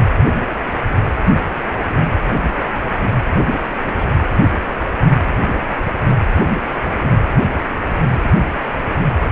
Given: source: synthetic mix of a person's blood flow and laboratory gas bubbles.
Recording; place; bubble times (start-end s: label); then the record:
Doppler ultrasound of blood flow; precordium
0.91-0.95 s: bubbles
1.38-1.43 s: bubbles
1.49-1.69 s: bubbles
2.53-2.63 s: bubbles
3.98-4.08 s: bubbles
8.63-8.69 s: bubbles
From the record:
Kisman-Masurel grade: 121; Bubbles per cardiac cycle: 1 to 2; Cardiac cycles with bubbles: 10 to 50%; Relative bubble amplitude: barely perceptible (0.100 to 0.250); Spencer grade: 2 (many but less than half of the cardiac periods contain bubble signals, singularly or in groups); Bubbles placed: anywhere in the cardiac cycle